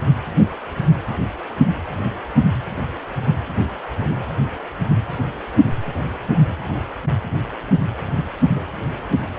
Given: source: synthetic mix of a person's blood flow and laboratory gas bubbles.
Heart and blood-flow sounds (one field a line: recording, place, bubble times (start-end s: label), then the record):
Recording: Doppler ultrasound of blood flow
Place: precordium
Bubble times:
8.54-8.62 s: bubbles
From the record:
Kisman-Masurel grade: 122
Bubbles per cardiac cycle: 1 to 2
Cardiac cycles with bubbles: 10 to 50%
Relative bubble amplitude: moderate (0.250 to 0.450)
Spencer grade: 2 (many but less than half of the cardiac periods contain bubble signals, singularly or in groups)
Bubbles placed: anywhere in the cardiac cycle